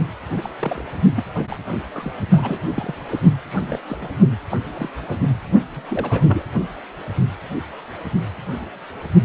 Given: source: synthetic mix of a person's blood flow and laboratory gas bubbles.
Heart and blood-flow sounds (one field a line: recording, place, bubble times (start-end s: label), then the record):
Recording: Doppler ultrasound of blood flow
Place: precordium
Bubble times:
0.30-0.50 s: bubbles
0.59-0.85 s: bubbles
1.16-1.23 s: bubbles
1.34-1.44 s: bubbles
1.48-1.56 s: bubbles
1.94-2.11 s: bubbles
2.31-2.60 s: bubbles
2.75-2.95 s: bubbles
3.08-3.20 s: bubbles
3.50-3.79 s: bubbles
3.89-3.96 s: bubbles
4.01-4.08 s: bubbles
4.50-4.57 s: bubbles
4.74-4.89 s: bubbles
5.08-5.16 s: bubbles
5.73-6.46 s: bubbles
From the record:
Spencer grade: 3 (all of the cardiac periods contain showers or single bubble signals, but not dominating or overriding the cardiac motion signals)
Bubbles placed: only in the low amplitude regions of the cardiac cycle